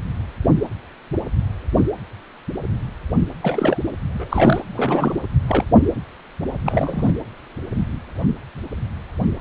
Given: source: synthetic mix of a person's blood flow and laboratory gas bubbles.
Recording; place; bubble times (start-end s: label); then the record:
Doppler ultrasound of blood flow; precordium
3.42-3.84 s: bubbles
4.13-4.60 s: bubbles
4.72-5.21 s: bubbles
5.48-5.65 s: bubbles
6.65-7.14 s: bubbles
From the record:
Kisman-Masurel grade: 222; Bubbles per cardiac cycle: several, 3 to 8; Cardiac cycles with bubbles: 10 to 50%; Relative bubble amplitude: moderate (0.250 to 0.450); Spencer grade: 2 (many but less than half of the cardiac periods contain bubble signals, singularly or in groups); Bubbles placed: anywhere in the cardiac cycle